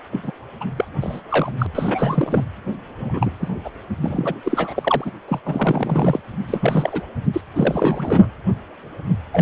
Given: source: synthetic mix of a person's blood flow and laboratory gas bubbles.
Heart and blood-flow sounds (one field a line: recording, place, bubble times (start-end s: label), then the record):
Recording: Doppler ultrasound of blood flow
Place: precordium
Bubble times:
0.12-0.20 s: bubbles
0.23-0.31 s: bubbles
0.60-0.65 s: bubbles
0.77-0.85 s: bubbles
1.00-1.21 s: bubbles
1.29-1.52 s: bubbles
1.58-1.67 s: bubbles
1.75-2.44 s: bubbles
3.00-3.33 s: bubbles
3.39-3.48 s: bubbles
3.64-3.70 s: bubbles
4.01-4.34 s: bubbles
4.43-5.12 s: bubbles
5.28-5.40 s: bubbles
5.45-6.20 s: bubbles
6.48-7.01 s: bubbles
7.33-7.41 s: bubbles
7.55-8.26 s: bubbles
9.32-9.42 s: bubbles
From the record:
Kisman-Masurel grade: 332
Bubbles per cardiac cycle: rolling drumbeat, 9 or more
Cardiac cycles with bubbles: 50 to 99%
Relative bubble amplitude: moderate (0.250 to 0.450)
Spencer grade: 3 (all of the cardiac periods contain showers or single bubble signals, but not dominating or overriding the cardiac motion signals)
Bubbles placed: anywhere in the cardiac cycle